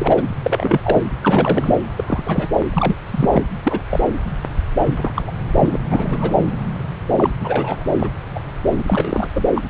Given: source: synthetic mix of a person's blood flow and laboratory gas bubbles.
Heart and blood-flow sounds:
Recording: Doppler ultrasound of blood flow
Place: subclavian vein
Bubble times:
0.00-0.28 s: bubbles
0.43-0.80 s: bubbles
0.83-1.02 s: bubbles
1.21-1.75 s: bubbles
1.98-2.04 s: bubbles
2.07-2.48 s: bubbles
2.73-2.95 s: bubbles
3.06-3.45 s: bubbles
3.63-3.82 s: bubbles
3.90-4.00 s: bubbles
4.79-5.12 s: bubbles
5.16-5.21 s: bubbles
5.26-5.32 s: bubbles
5.54-5.78 s: bubbles
5.89-6.38 s: bubbles
7.17-7.32 s: bubbles
7.41-7.84 s: bubbles
7.99-8.09 s: bubbles
8.35-8.40 s: bubbles
8.78-9.28 s: bubbles
9.34-9.46 s: bubbles
9.54-9.62 s: bubbles
From the record:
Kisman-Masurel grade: 233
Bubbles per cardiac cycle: several, 3 to 8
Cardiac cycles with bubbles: 50 to 99%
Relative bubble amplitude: loud (0.450 to 0.775)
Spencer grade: 3 (all of the cardiac periods contain showers or single bubble signals, but not dominating or overriding the cardiac motion signals)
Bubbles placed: anywhere in the cardiac cycle

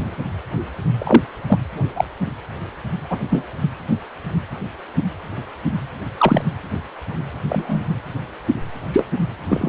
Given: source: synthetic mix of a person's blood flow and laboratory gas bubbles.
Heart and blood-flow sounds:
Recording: Doppler ultrasound of blood flow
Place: precordium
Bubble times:
0.99-1.23 s: bubbles
1.47-1.58 s: bubbles
1.96-2.04 s: bubbles
3.09-3.18 s: bubbles
3.30-3.44 s: bubbles
6.17-6.44 s: bubbles
7.49-7.83 s: bubbles
8.93-9.06 s: bubbles
9.49-9.69 s: bubbles
From the record:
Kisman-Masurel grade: 123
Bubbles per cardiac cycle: 1 to 2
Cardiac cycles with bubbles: 10 to 50%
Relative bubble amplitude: loud (0.450 to 0.775)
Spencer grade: 2 (many but less than half of the cardiac periods contain bubble signals, singularly or in groups)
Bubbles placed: anywhere in the cardiac cycle

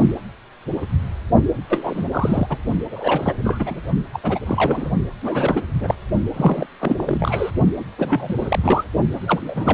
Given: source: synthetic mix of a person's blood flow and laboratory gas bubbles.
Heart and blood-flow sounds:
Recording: Doppler ultrasound of blood flow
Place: precordium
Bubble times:
1.69-2.05 s: bubbles
2.12-2.47 s: bubbles
2.50-2.57 s: bubbles
2.91-3.33 s: bubbles
3.44-3.81 s: bubbles
4.14-4.19 s: bubbles
4.23-4.39 s: bubbles
4.46-4.90 s: bubbles
5.22-5.71 s: bubbles
5.81-5.95 s: bubbles
6.33-6.67 s: bubbles
6.81-7.52 s: bubbles
7.79-7.85 s: bubbles
7.98-8.59 s: bubbles
8.63-8.84 s: bubbles
9.21-9.74 s: bubbles
From the record:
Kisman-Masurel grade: 332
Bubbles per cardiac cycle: rolling drumbeat, 9 or more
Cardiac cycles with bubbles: 50 to 99%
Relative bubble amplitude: moderate (0.250 to 0.450)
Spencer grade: 3 (all of the cardiac periods contain showers or single bubble signals, but not dominating or overriding the cardiac motion signals)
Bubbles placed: only in the low amplitude regions of the cardiac cycle

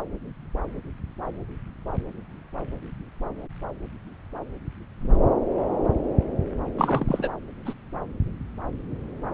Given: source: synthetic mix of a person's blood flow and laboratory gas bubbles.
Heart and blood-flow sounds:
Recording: Doppler ultrasound of blood flow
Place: subclavian vein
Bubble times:
6.76-7.06 s: bubbles
7.08-7.28 s: bubbles
7.66-7.73 s: bubbles
From the record:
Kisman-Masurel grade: 222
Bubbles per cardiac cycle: several, 3 to 8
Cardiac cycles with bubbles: 10 to 50%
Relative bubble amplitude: moderate (0.250 to 0.450)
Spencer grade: 2 (many but less than half of the cardiac periods contain bubble signals, singularly or in groups)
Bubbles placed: anywhere in the cardiac cycle

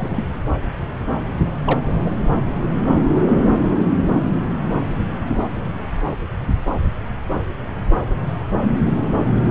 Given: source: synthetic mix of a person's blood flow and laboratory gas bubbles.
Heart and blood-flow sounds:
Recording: Doppler ultrasound of blood flow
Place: subclavian vein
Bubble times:
0.00-0.23 s: bubbles
1.65-1.79 s: bubbles
2.04-2.10 s: bubbles
From the record:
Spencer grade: 2 (many but less than half of the cardiac periods contain bubble signals, singularly or in groups)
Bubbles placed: anywhere in the cardiac cycle

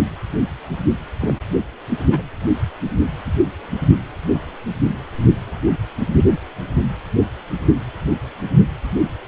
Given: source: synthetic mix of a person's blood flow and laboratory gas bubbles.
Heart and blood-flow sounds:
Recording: Doppler ultrasound of blood flow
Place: precordium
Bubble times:
1.21-1.34 s: bubbles
2.11-2.23 s: bubbles
From the record:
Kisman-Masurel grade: 112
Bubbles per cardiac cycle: 1 to 2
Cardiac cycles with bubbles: 1 to 10%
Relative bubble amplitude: moderate (0.250 to 0.450)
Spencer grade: 1 (occasional bubble signal discernible with the cardiac motion signal, with majority of cardiac periods free of bubbles)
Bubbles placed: anywhere in the cardiac cycle

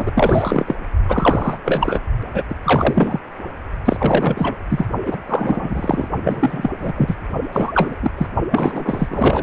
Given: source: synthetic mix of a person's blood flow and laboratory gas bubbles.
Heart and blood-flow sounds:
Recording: Doppler ultrasound of blood flow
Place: precordium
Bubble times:
0.00-0.11 s: bubbles
0.15-0.76 s: bubbles
1.08-1.58 s: bubbles
1.65-2.00 s: bubbles
2.33-2.44 s: bubbles
2.49-2.54 s: bubbles
2.63-3.19 s: bubbles
3.85-4.57 s: bubbles
4.70-4.85 s: bubbles
5.05-5.17 s: bubbles
5.27-6.08 s: bubbles
6.23-6.70 s: bubbles
6.80-6.93 s: bubbles
6.96-7.16 s: bubbles
7.52-7.71 s: bubbles
7.74-7.95 s: bubbles
8.02-8.11 s: bubbles
8.18-8.27 s: bubbles
8.50-9.43 s: bubbles
From the record:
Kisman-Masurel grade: 343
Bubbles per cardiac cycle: rolling drumbeat, 9 or more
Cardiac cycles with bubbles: 100%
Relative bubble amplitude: loud (0.450 to 0.775)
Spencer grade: 3 (all of the cardiac periods contain showers or single bubble signals, but not dominating or overriding the cardiac motion signals)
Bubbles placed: only in the low amplitude regions of the cardiac cycle

